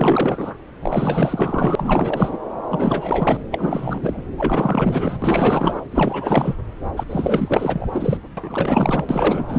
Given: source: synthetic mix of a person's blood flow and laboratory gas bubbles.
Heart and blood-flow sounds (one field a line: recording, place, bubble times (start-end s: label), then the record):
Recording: Doppler ultrasound of blood flow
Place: subclavian vein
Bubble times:
0.00-0.54 s: bubbles
0.81-2.38 s: bubbles
2.70-3.44 s: bubbles
3.51-4.23 s: bubbles
4.37-5.82 s: bubbles
5.91-6.55 s: bubbles
6.96-7.04 s: bubbles
7.09-7.87 s: bubbles
7.92-8.18 s: bubbles
8.37-9.05 s: bubbles
9.09-9.59 s: bubbles
From the record:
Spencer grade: 4 (maximum detectable bubble signal sounding continuously throughout systole and diastole of every cardiac period, and overriding the amplitude of the normal cardiac signals)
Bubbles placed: anywhere in the cardiac cycle